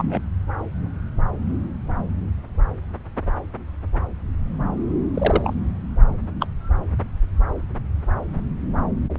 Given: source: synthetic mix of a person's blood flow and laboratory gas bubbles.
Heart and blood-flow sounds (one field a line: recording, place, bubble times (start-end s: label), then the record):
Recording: Doppler ultrasound of blood flow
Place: subclavian vein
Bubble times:
0.00-0.21 s: bubbles
5.14-5.54 s: bubbles
6.41-6.47 s: bubbles
From the record:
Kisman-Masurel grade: 122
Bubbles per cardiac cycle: 1 to 2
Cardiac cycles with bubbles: 10 to 50%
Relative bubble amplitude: moderate (0.250 to 0.450)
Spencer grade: 2 (many but less than half of the cardiac periods contain bubble signals, singularly or in groups)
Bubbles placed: anywhere in the cardiac cycle